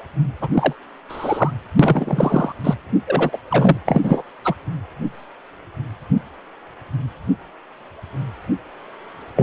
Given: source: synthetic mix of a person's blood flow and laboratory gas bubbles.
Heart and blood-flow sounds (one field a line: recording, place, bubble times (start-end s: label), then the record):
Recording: Doppler ultrasound of blood flow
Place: precordium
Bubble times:
0.41-0.48 s: bubbles
0.53-0.73 s: bubbles
1.08-1.51 s: bubbles
1.79-2.53 s: bubbles
2.64-2.74 s: bubbles
3.06-3.38 s: bubbles
3.49-3.78 s: bubbles
3.86-4.22 s: bubbles
4.44-4.54 s: bubbles
9.36-9.43 s: bubbles
From the record:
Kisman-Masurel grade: 233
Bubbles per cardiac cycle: several, 3 to 8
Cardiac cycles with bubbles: 50 to 99%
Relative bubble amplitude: loud (0.450 to 0.775)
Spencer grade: 3 (all of the cardiac periods contain showers or single bubble signals, but not dominating or overriding the cardiac motion signals)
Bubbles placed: anywhere in the cardiac cycle